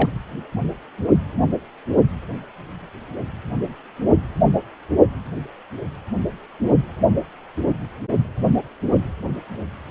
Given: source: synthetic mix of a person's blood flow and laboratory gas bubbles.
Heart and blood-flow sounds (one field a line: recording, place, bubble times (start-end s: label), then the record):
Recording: Doppler ultrasound of blood flow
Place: precordium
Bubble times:
0.00-0.10 s: bubbles
From the record:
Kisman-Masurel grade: 212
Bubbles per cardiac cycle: several, 3 to 8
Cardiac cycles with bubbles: 1 to 10%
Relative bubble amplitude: moderate (0.250 to 0.450)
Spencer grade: 1 (occasional bubble signal discernible with the cardiac motion signal, with majority of cardiac periods free of bubbles)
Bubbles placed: only in the low amplitude regions of the cardiac cycle